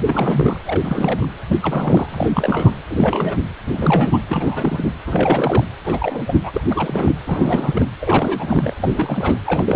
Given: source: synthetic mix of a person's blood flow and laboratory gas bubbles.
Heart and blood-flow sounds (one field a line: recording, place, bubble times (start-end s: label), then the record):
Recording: Doppler ultrasound of blood flow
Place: precordium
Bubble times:
0.06-0.59 s: bubbles
0.65-1.27 s: bubbles
1.47-1.60 s: bubbles
1.62-2.73 s: bubbles
2.88-3.38 s: bubbles
3.65-4.18 s: bubbles
4.28-4.92 s: bubbles
5.06-5.64 s: bubbles
5.84-6.24 s: bubbles
6.26-6.62 s: bubbles
6.70-7.17 s: bubbles
7.25-7.86 s: bubbles
8.01-8.74 s: bubbles
8.78-9.35 s: bubbles
9.46-9.76 s: bubbles
From the record:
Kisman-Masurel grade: 342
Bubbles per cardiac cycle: rolling drumbeat, 9 or more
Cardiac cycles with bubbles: 100%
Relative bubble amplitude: moderate (0.250 to 0.450)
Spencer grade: 3 (all of the cardiac periods contain showers or single bubble signals, but not dominating or overriding the cardiac motion signals)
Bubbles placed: anywhere in the cardiac cycle